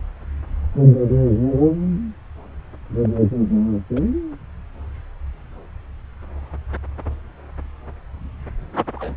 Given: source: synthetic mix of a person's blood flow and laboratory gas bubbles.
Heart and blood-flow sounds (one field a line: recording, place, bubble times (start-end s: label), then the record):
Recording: Doppler ultrasound of blood flow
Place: subclavian vein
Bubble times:
3.02-3.08 s: bubbles
3.96-4.01 s: bubbles
8.95-9.15 s: bubbles
From the record:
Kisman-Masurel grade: 121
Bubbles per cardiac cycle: 1 to 2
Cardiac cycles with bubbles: 10 to 50%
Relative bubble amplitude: barely perceptible (0.100 to 0.250)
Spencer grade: 2 (many but less than half of the cardiac periods contain bubble signals, singularly or in groups)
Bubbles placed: anywhere in the cardiac cycle